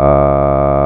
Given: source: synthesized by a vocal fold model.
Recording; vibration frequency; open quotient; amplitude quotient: sustained vowel; 70 Hz; 0.4; 1.2